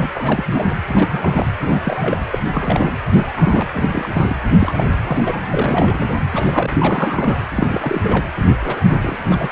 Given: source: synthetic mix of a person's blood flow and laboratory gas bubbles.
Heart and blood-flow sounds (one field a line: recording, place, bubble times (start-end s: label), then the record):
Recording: Doppler ultrasound of blood flow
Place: precordium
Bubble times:
0.00-0.09 s: bubbles
0.15-0.74 s: bubbles
0.86-1.49 s: bubbles
1.58-1.79 s: bubbles
1.83-2.19 s: bubbles
2.30-2.39 s: bubbles
2.52-2.96 s: bubbles
3.08-3.69 s: bubbles
3.74-4.09 s: bubbles
4.12-4.35 s: bubbles
4.58-5.44 s: bubbles
5.47-6.09 s: bubbles
6.28-6.71 s: bubbles
6.78-7.36 s: bubbles
7.54-8.29 s: bubbles
8.57-8.80 s: bubbles
8.89-8.96 s: bubbles
9.02-9.17 s: bubbles
9.29-9.50 s: bubbles
From the record:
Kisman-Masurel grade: 332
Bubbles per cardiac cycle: rolling drumbeat, 9 or more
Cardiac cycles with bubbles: 50 to 99%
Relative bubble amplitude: moderate (0.250 to 0.450)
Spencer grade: 3 (all of the cardiac periods contain showers or single bubble signals, but not dominating or overriding the cardiac motion signals)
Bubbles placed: anywhere in the cardiac cycle